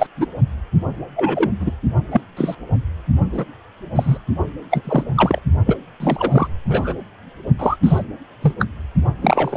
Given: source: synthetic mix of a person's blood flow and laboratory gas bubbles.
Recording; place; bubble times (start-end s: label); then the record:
Doppler ultrasound of blood flow; precordium
0.00-0.07 s: bubbles
0.17-0.26 s: bubbles
1.16-1.50 s: bubbles
1.60-1.71 s: bubbles
2.12-2.21 s: bubbles
2.37-2.55 s: bubbles
3.32-3.45 s: bubbles
3.95-4.17 s: bubbles
4.70-4.82 s: bubbles
4.85-5.04 s: bubbles
5.17-5.40 s: bubbles
5.66-5.76 s: bubbles
6.00-6.48 s: bubbles
6.69-6.94 s: bubbles
7.58-7.76 s: bubbles
7.83-8.03 s: bubbles
8.42-8.53 s: bubbles
8.59-8.65 s: bubbles
9.21-9.57 s: bubbles
From the record:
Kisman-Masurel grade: 243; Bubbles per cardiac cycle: several, 3 to 8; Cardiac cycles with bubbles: 100%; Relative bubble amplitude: loud (0.450 to 0.775); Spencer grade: 3 (all of the cardiac periods contain showers or single bubble signals, but not dominating or overriding the cardiac motion signals); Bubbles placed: only in the low amplitude regions of the cardiac cycle